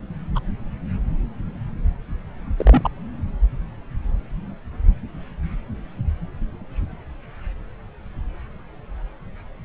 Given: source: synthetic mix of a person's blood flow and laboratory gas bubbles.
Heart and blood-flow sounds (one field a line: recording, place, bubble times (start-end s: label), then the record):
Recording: Doppler ultrasound of blood flow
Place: subclavian vein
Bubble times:
0.35-0.39 s: bubbles
2.58-2.89 s: bubbles
From the record:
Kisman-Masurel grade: 122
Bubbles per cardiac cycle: 1 to 2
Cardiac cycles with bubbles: 10 to 50%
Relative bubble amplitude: moderate (0.250 to 0.450)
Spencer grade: 2 (many but less than half of the cardiac periods contain bubble signals, singularly or in groups)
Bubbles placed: anywhere in the cardiac cycle